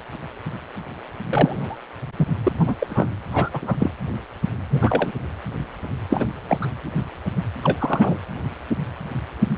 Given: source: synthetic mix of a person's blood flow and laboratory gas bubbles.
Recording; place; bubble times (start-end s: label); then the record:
Doppler ultrasound of blood flow; precordium
1.31-1.76 s: bubbles
2.19-2.27 s: bubbles
2.46-2.52 s: bubbles
2.58-2.75 s: bubbles
2.80-3.08 s: bubbles
3.32-3.50 s: bubbles
3.52-3.76 s: bubbles
3.78-3.91 s: bubbles
4.71-5.12 s: bubbles
6.10-6.29 s: bubbles
6.49-6.58 s: bubbles
6.62-6.67 s: bubbles
7.63-8.18 s: bubbles
From the record:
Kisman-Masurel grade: 222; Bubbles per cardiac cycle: several, 3 to 8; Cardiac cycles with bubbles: 10 to 50%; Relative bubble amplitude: moderate (0.250 to 0.450); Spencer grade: 2 (many but less than half of the cardiac periods contain bubble signals, singularly or in groups); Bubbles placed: anywhere in the cardiac cycle